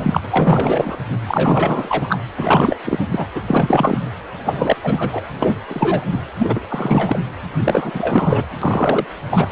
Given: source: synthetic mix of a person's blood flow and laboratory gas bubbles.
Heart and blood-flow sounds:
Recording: Doppler ultrasound of blood flow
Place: precordium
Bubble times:
0.00-0.20 s: bubbles
0.31-0.97 s: bubbles
1.28-2.19 s: bubbles
2.36-2.76 s: bubbles
2.84-2.99 s: bubbles
3.11-3.26 s: bubbles
3.35-3.40 s: bubbles
3.46-3.98 s: bubbles
4.44-4.77 s: bubbles
4.82-5.21 s: bubbles
5.40-5.55 s: bubbles
5.69-6.01 s: bubbles
6.12-6.22 s: bubbles
6.39-6.60 s: bubbles
6.70-7.19 s: bubbles
7.64-7.91 s: bubbles
7.94-8.43 s: bubbles
8.62-9.05 s: bubbles
9.30-9.48 s: bubbles
From the record:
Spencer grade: 3 (all of the cardiac periods contain showers or single bubble signals, but not dominating or overriding the cardiac motion signals)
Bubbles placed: anywhere in the cardiac cycle

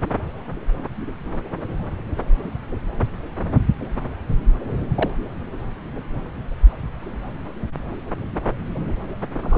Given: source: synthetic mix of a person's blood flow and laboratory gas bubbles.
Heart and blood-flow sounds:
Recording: Doppler ultrasound of blood flow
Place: subclavian vein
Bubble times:
4.95-5.09 s: bubbles
9.42-9.58 s: bubbles
From the record:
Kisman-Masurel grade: 122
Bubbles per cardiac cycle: 1 to 2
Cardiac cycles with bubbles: 10 to 50%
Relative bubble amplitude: moderate (0.250 to 0.450)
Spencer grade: 2 (many but less than half of the cardiac periods contain bubble signals, singularly or in groups)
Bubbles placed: anywhere in the cardiac cycle

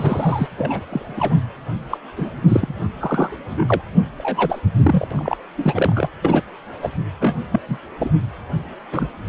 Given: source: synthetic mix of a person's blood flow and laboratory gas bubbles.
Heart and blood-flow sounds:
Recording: Doppler ultrasound of blood flow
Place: precordium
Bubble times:
0.00-0.48 s: bubbles
0.58-0.84 s: bubbles
0.89-1.35 s: bubbles
1.90-1.97 s: bubbles
2.17-2.30 s: bubbles
2.48-2.83 s: bubbles
2.99-3.38 s: bubbles
3.52-3.65 s: bubbles
3.68-3.82 s: bubbles
4.18-4.61 s: bubbles
4.77-5.08 s: bubbles
5.11-5.37 s: bubbles
5.58-6.08 s: bubbles
6.23-6.42 s: bubbles
6.82-6.90 s: bubbles
7.20-7.36 s: bubbles
7.52-7.60 s: bubbles
7.68-7.78 s: bubbles
7.98-8.12 s: bubbles
8.92-9.09 s: bubbles
From the record:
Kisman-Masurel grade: 232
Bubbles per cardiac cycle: several, 3 to 8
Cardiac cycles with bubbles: 50 to 99%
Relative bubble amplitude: moderate (0.250 to 0.450)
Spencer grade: 3 (all of the cardiac periods contain showers or single bubble signals, but not dominating or overriding the cardiac motion signals)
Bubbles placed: anywhere in the cardiac cycle

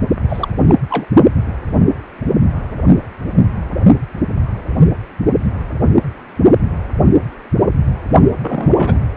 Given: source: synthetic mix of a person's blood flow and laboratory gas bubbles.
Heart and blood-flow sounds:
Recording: Doppler ultrasound of blood flow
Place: precordium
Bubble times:
0.29-0.48 s: bubbles
0.67-0.75 s: bubbles
0.90-1.07 s: bubbles
8.41-9.00 s: bubbles
From the record:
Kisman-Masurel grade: 222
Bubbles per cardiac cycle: several, 3 to 8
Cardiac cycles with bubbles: 10 to 50%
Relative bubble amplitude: moderate (0.250 to 0.450)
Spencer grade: 2 (many but less than half of the cardiac periods contain bubble signals, singularly or in groups)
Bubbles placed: only in the low amplitude regions of the cardiac cycle

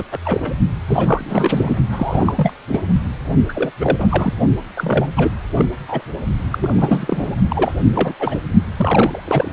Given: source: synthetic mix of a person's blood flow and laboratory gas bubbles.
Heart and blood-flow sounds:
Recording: Doppler ultrasound of blood flow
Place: precordium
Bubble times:
0.00-0.04 s: bubbles
0.11-0.18 s: bubbles
0.24-0.53 s: bubbles
0.87-1.77 s: bubbles
1.92-2.53 s: bubbles
2.68-2.82 s: bubbles
3.48-3.71 s: bubbles
3.80-4.34 s: bubbles
4.76-5.09 s: bubbles
5.17-5.31 s: bubbles
5.57-5.65 s: bubbles
5.88-6.03 s: bubbles
6.50-7.35 s: bubbles
7.50-7.72 s: bubbles
7.92-8.14 s: bubbles
8.19-8.40 s: bubbles
8.76-9.21 s: bubbles
9.24-9.53 s: bubbles
From the record:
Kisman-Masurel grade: 342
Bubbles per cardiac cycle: rolling drumbeat, 9 or more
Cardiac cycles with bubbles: 100%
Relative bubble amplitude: moderate (0.250 to 0.450)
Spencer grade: 3 (all of the cardiac periods contain showers or single bubble signals, but not dominating or overriding the cardiac motion signals)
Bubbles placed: only in the low amplitude regions of the cardiac cycle

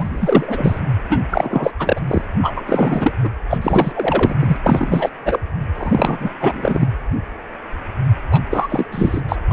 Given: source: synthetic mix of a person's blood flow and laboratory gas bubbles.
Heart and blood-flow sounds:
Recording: Doppler ultrasound of blood flow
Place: precordium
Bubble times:
0.00-0.81 s: bubbles
1.09-1.22 s: bubbles
1.30-1.72 s: bubbles
1.79-2.01 s: bubbles
2.07-2.22 s: bubbles
2.41-3.15 s: bubbles
3.22-3.29 s: bubbles
3.49-3.58 s: bubbles
3.61-4.36 s: bubbles
4.39-4.57 s: bubbles
4.63-5.10 s: bubbles
5.25-5.39 s: bubbles
5.75-6.30 s: bubbles
6.40-6.87 s: bubbles
8.30-8.42 s: bubbles
8.50-8.85 s: bubbles
8.91-9.22 s: bubbles
9.28-9.36 s: bubbles
9.49-9.53 s: bubbles
From the record:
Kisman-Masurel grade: 333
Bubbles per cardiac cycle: rolling drumbeat, 9 or more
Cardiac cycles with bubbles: 50 to 99%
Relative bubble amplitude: loud (0.450 to 0.775)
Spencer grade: 3 (all of the cardiac periods contain showers or single bubble signals, but not dominating or overriding the cardiac motion signals)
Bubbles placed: anywhere in the cardiac cycle

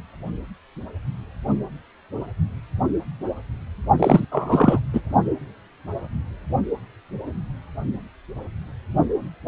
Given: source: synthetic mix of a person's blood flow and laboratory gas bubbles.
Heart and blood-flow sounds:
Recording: Doppler ultrasound of blood flow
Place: precordium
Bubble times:
3.99-4.25 s: bubbles
4.31-4.79 s: bubbles
4.93-5.01 s: bubbles
From the record:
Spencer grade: 1 (occasional bubble signal discernible with the cardiac motion signal, with majority of cardiac periods free of bubbles)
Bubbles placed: only in the low amplitude regions of the cardiac cycle

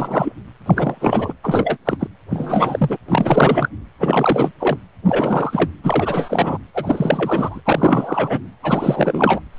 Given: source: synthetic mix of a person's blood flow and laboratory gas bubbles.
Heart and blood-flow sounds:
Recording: Doppler ultrasound of blood flow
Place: precordium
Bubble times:
0.00-0.32 s: bubbles
0.66-1.33 s: bubbles
1.43-1.77 s: bubbles
1.85-2.08 s: bubbles
2.30-2.97 s: bubbles
3.08-3.69 s: bubbles
4.00-4.51 s: bubbles
4.60-4.77 s: bubbles
5.05-5.71 s: bubbles
5.83-6.57 s: bubbles
6.74-7.60 s: bubbles
7.65-8.40 s: bubbles
8.62-9.40 s: bubbles
9.56-9.59 s: bubbles
From the record:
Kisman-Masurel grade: 343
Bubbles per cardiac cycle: rolling drumbeat, 9 or more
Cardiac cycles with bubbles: 100%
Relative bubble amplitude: loud (0.450 to 0.775)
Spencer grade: 3 (all of the cardiac periods contain showers or single bubble signals, but not dominating or overriding the cardiac motion signals)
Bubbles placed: anywhere in the cardiac cycle

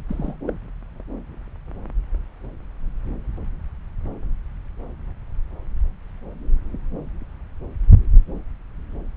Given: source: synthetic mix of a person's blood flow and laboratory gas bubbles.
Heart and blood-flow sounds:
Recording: Doppler ultrasound of blood flow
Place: subclavian vein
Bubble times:
0.08-0.34 s: bubbles
0.47-0.53 s: bubbles
From the record:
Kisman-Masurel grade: 111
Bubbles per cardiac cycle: 1 to 2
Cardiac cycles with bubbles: 1 to 10%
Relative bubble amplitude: barely perceptible (0.100 to 0.250)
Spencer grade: 1 (occasional bubble signal discernible with the cardiac motion signal, with majority of cardiac periods free of bubbles)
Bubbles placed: anywhere in the cardiac cycle

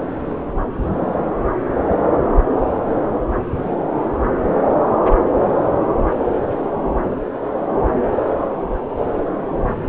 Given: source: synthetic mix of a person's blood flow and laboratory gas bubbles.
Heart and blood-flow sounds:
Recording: Doppler ultrasound of blood flow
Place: subclavian vein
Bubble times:
no bubbles
From the record:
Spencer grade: 0 (complete lack of bubble signals)

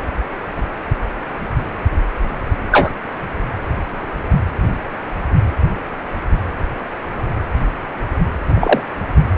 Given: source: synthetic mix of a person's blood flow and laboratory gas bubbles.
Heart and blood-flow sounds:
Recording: Doppler ultrasound of blood flow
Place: precordium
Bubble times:
2.71-2.90 s: bubbles
8.54-8.81 s: bubbles
From the record:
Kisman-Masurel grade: 123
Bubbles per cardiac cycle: 1 to 2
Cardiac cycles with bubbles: 10 to 50%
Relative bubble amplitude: loud (0.450 to 0.775)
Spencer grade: 2 (many but less than half of the cardiac periods contain bubble signals, singularly or in groups)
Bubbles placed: anywhere in the cardiac cycle

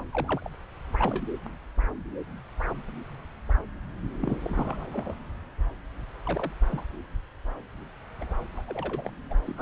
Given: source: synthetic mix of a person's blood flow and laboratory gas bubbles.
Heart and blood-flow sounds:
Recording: Doppler ultrasound of blood flow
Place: subclavian vein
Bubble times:
0.11-0.50 s: bubbles
0.98-1.24 s: bubbles
4.21-5.14 s: bubbles
6.25-6.52 s: bubbles
6.67-6.83 s: bubbles
8.21-8.35 s: bubbles
8.55-8.62 s: bubbles
8.68-9.11 s: bubbles
9.30-9.34 s: bubbles
9.46-9.54 s: bubbles
9.57-9.62 s: bubbles
From the record:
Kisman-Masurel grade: 221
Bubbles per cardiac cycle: several, 3 to 8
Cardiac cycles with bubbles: 10 to 50%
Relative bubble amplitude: barely perceptible (0.100 to 0.250)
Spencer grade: 2 (many but less than half of the cardiac periods contain bubble signals, singularly or in groups)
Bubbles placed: anywhere in the cardiac cycle

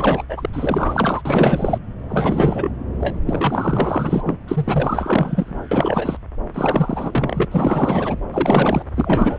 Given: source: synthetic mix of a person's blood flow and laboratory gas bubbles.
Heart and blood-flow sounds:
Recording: Doppler ultrasound of blood flow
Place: subclavian vein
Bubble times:
0.00-0.23 s: bubbles
0.29-0.49 s: bubbles
0.53-1.22 s: bubbles
1.25-1.79 s: bubbles
2.08-2.71 s: bubbles
3.00-3.18 s: bubbles
3.26-4.37 s: bubbles
4.47-5.60 s: bubbles
5.71-6.17 s: bubbles
6.54-7.45 s: bubbles
7.51-8.15 s: bubbles
8.32-8.83 s: bubbles
8.95-9.39 s: bubbles
From the record:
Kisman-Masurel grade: 444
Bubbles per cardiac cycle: continuous sound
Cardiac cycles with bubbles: 100%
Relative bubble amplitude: maximal (0.775 to 0.999)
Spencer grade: 4 (maximum detectable bubble signal sounding continuously throughout systole and diastole of every cardiac period, and overriding the amplitude of the normal cardiac signals)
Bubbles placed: anywhere in the cardiac cycle

